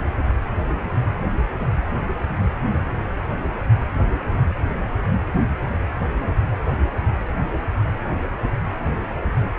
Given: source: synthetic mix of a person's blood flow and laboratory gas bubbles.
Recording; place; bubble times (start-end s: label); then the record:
Doppler ultrasound of blood flow; precordium
no bubbles
From the record:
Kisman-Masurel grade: 000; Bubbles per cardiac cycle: 0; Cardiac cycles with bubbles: 0%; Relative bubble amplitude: no bubbles discernible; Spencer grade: 0 (complete lack of bubble signals)